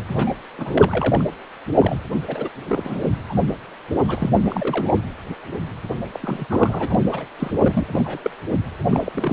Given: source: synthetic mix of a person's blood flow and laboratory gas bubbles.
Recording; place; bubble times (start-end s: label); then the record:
Doppler ultrasound of blood flow; precordium
0.07-0.32 s: bubbles
0.57-1.24 s: bubbles
1.78-1.96 s: bubbles
2.27-2.49 s: bubbles
2.68-3.06 s: bubbles
3.29-3.34 s: bubbles
4.08-4.29 s: bubbles
4.43-4.97 s: bubbles
6.13-6.46 s: bubbles
6.48-6.95 s: bubbles
6.98-7.26 s: bubbles
7.39-7.51 s: bubbles
7.59-7.86 s: bubbles
7.92-8.36 s: bubbles
8.90-9.32 s: bubbles
From the record:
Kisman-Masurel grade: 242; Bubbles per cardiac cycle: several, 3 to 8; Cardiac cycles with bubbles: 100%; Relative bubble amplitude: moderate (0.250 to 0.450); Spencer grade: 3 (all of the cardiac periods contain showers or single bubble signals, but not dominating or overriding the cardiac motion signals); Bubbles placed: anywhere in the cardiac cycle